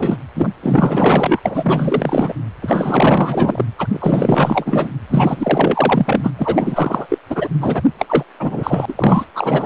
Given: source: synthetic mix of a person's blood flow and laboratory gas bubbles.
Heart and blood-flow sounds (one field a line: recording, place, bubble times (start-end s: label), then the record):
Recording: Doppler ultrasound of blood flow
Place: precordium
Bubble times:
0.00-0.17 s: bubbles
0.35-0.49 s: bubbles
0.62-1.40 s: bubbles
1.45-2.34 s: bubbles
2.61-3.65 s: bubbles
3.78-3.87 s: bubbles
3.91-4.89 s: bubbles
5.09-6.31 s: bubbles
6.38-7.06 s: bubbles
7.08-7.18 s: bubbles
7.29-7.49 s: bubbles
7.61-7.82 s: bubbles
7.99-8.05 s: bubbles
8.08-8.24 s: bubbles
8.39-8.94 s: bubbles
8.96-9.25 s: bubbles
9.34-9.66 s: bubbles
From the record:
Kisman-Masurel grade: 444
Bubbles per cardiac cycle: continuous sound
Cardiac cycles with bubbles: 100%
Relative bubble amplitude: maximal (0.775 to 0.999)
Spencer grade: 4 (maximum detectable bubble signal sounding continuously throughout systole and diastole of every cardiac period, and overriding the amplitude of the normal cardiac signals)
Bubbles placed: anywhere in the cardiac cycle